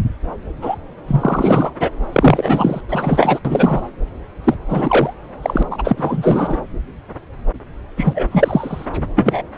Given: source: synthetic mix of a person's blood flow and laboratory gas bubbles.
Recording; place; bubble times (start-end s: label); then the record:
Doppler ultrasound of blood flow; subclavian vein
0.61-0.75 s: bubbles
1.07-1.70 s: bubbles
1.79-1.91 s: bubbles
2.12-2.81 s: bubbles
2.89-3.39 s: bubbles
3.45-3.88 s: bubbles
4.44-4.54 s: bubbles
4.69-5.13 s: bubbles
5.42-5.63 s: bubbles
5.70-6.58 s: bubbles
7.97-8.85 s: bubbles
9.16-9.41 s: bubbles
From the record:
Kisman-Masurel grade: 333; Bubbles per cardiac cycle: rolling drumbeat, 9 or more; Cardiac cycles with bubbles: 50 to 99%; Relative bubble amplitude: loud (0.450 to 0.775); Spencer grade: 3 (all of the cardiac periods contain showers or single bubble signals, but not dominating or overriding the cardiac motion signals); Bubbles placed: anywhere in the cardiac cycle